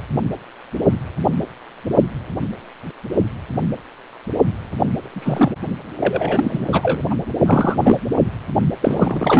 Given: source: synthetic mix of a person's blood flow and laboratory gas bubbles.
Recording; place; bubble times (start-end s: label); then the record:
Doppler ultrasound of blood flow; precordium
5.00-5.51 s: bubbles
6.00-7.01 s: bubbles
7.09-7.15 s: bubbles
7.46-8.03 s: bubbles
8.82-9.39 s: bubbles
From the record:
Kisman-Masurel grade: 233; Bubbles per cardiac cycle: several, 3 to 8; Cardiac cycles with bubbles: 50 to 99%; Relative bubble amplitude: loud (0.450 to 0.775); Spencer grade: 3 (all of the cardiac periods contain showers or single bubble signals, but not dominating or overriding the cardiac motion signals); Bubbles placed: only in the low amplitude regions of the cardiac cycle